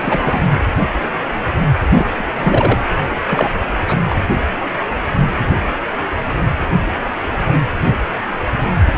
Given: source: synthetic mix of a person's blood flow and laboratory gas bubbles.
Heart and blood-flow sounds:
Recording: Doppler ultrasound of blood flow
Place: precordium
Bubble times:
0.00-0.42 s: bubbles
1.90-2.07 s: bubbles
2.15-2.80 s: bubbles
3.27-3.52 s: bubbles
3.88-3.98 s: bubbles
4.10-4.15 s: bubbles
From the record:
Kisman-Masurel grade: 223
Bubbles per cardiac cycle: several, 3 to 8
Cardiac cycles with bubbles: 10 to 50%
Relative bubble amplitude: loud (0.450 to 0.775)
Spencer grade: 2 (many but less than half of the cardiac periods contain bubble signals, singularly or in groups)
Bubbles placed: anywhere in the cardiac cycle

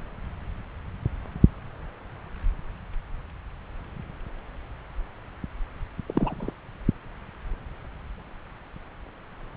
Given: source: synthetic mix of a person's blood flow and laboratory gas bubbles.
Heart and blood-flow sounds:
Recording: Doppler ultrasound of blood flow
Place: subclavian vein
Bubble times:
6.06-6.54 s: bubbles
From the record:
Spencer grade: 1 (occasional bubble signal discernible with the cardiac motion signal, with majority of cardiac periods free of bubbles)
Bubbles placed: anywhere in the cardiac cycle

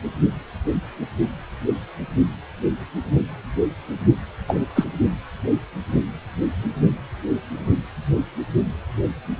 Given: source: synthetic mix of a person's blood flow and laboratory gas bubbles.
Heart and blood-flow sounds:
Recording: Doppler ultrasound of blood flow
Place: precordium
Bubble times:
4.47-4.56 s: bubbles
4.75-4.85 s: bubbles
From the record:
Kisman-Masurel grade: 112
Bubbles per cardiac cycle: 1 to 2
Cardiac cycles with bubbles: 1 to 10%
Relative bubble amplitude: moderate (0.250 to 0.450)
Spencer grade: 1 (occasional bubble signal discernible with the cardiac motion signal, with majority of cardiac periods free of bubbles)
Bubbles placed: anywhere in the cardiac cycle

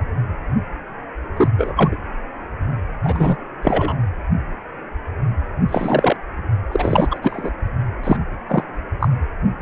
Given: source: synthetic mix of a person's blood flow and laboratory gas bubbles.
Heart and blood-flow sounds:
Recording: Doppler ultrasound of blood flow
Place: precordium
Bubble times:
1.36-1.48 s: bubbles
1.58-1.73 s: bubbles
1.76-1.97 s: bubbles
3.03-3.37 s: bubbles
3.63-3.94 s: bubbles
5.67-6.17 s: bubbles
6.71-7.08 s: bubbles
7.11-7.18 s: bubbles
7.22-7.50 s: bubbles
8.03-8.17 s: bubbles
8.49-8.63 s: bubbles
9.00-9.08 s: bubbles
From the record:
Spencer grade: 2 (many but less than half of the cardiac periods contain bubble signals, singularly or in groups)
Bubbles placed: anywhere in the cardiac cycle

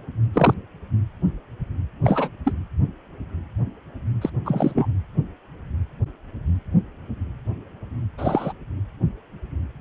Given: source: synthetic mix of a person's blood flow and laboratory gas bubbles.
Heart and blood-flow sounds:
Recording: Doppler ultrasound of blood flow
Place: precordium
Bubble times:
0.33-0.54 s: bubbles
2.04-2.29 s: bubbles
2.45-2.52 s: bubbles
4.21-4.30 s: bubbles
4.45-4.87 s: bubbles
8.17-8.53 s: bubbles
From the record:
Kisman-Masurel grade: 222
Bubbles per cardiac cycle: several, 3 to 8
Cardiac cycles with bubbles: 10 to 50%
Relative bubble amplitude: moderate (0.250 to 0.450)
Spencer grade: 2 (many but less than half of the cardiac periods contain bubble signals, singularly or in groups)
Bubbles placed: anywhere in the cardiac cycle

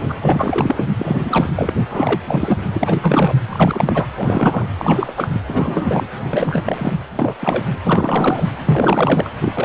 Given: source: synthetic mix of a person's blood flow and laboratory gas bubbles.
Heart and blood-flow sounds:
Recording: Doppler ultrasound of blood flow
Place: precordium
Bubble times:
0.08-0.14 s: bubbles
0.21-0.83 s: bubbles
0.96-1.50 s: bubbles
1.56-1.73 s: bubbles
1.89-2.21 s: bubbles
2.27-2.65 s: bubbles
2.73-2.98 s: bubbles
3.02-3.34 s: bubbles
3.49-4.07 s: bubbles
4.15-4.68 s: bubbles
4.78-5.12 s: bubbles
5.17-5.29 s: bubbles
5.33-5.42 s: bubbles
5.48-6.07 s: bubbles
6.28-6.94 s: bubbles
7.19-7.35 s: bubbles
7.41-7.65 s: bubbles
7.83-8.50 s: bubbles
8.63-9.30 s: bubbles
9.41-9.65 s: bubbles
From the record:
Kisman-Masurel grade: 343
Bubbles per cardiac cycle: rolling drumbeat, 9 or more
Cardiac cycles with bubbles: 100%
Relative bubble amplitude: loud (0.450 to 0.775)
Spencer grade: 3 (all of the cardiac periods contain showers or single bubble signals, but not dominating or overriding the cardiac motion signals)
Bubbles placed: anywhere in the cardiac cycle

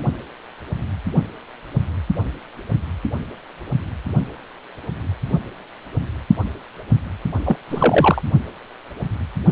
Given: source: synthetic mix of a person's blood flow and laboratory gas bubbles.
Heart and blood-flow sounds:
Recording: Doppler ultrasound of blood flow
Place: precordium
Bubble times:
7.45-7.56 s: bubbles
7.70-8.21 s: bubbles
From the record:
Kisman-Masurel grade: 213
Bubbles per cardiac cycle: several, 3 to 8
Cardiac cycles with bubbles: 1 to 10%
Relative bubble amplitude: loud (0.450 to 0.775)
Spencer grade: 1 (occasional bubble signal discernible with the cardiac motion signal, with majority of cardiac periods free of bubbles)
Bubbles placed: only in the low amplitude regions of the cardiac cycle

